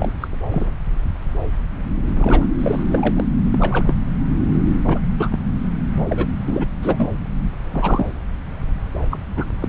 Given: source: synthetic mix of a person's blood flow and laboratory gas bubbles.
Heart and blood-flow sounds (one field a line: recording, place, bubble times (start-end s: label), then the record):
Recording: Doppler ultrasound of blood flow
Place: subclavian vein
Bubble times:
0.00-0.12 s: bubbles
0.20-0.28 s: bubbles
0.51-0.71 s: bubbles
2.08-2.47 s: bubbles
2.58-2.83 s: bubbles
2.89-3.25 s: bubbles
3.52-3.94 s: bubbles
4.83-5.00 s: bubbles
5.17-5.29 s: bubbles
5.31-5.39 s: bubbles
5.62-5.68 s: bubbles
5.93-6.03 s: bubbles
6.10-6.26 s: bubbles
6.46-6.66 s: bubbles
6.82-7.07 s: bubbles
7.70-8.11 s: bubbles
9.10-9.18 s: bubbles
9.37-9.45 s: bubbles
9.62-9.69 s: bubbles
From the record:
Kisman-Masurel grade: 242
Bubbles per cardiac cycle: several, 3 to 8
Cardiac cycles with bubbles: 100%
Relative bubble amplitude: moderate (0.250 to 0.450)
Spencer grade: 3 (all of the cardiac periods contain showers or single bubble signals, but not dominating or overriding the cardiac motion signals)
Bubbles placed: anywhere in the cardiac cycle